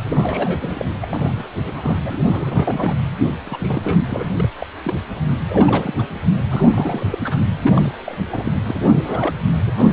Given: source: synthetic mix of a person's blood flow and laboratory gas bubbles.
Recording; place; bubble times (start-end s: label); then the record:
Doppler ultrasound of blood flow; precordium
0.05-0.85 s: bubbles
1.01-1.06 s: bubbles
1.09-1.47 s: bubbles
1.57-2.00 s: bubbles
2.02-2.17 s: bubbles
2.25-2.98 s: bubbles
3.44-3.99 s: bubbles
4.08-4.31 s: bubbles
4.35-4.47 s: bubbles
4.59-4.67 s: bubbles
4.84-4.94 s: bubbles
5.49-6.07 s: bubbles
6.49-7.18 s: bubbles
7.23-7.38 s: bubbles
7.59-7.95 s: bubbles
8.05-8.16 s: bubbles
8.31-8.53 s: bubbles
8.67-8.89 s: bubbles
8.96-9.35 s: bubbles
9.67-9.72 s: bubbles
9.76-9.93 s: bubbles
From the record:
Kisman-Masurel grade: 342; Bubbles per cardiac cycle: rolling drumbeat, 9 or more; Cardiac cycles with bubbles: 100%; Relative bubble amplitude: moderate (0.250 to 0.450); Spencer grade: 3 (all of the cardiac periods contain showers or single bubble signals, but not dominating or overriding the cardiac motion signals); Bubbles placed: anywhere in the cardiac cycle